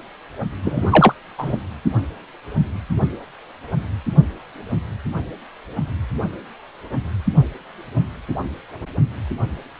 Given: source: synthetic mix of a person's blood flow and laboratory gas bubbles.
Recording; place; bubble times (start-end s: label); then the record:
Doppler ultrasound of blood flow; precordium
0.63-1.14 s: bubbles
1.38-1.55 s: bubbles
From the record:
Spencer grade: 1 (occasional bubble signal discernible with the cardiac motion signal, with majority of cardiac periods free of bubbles); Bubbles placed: only in the low amplitude regions of the cardiac cycle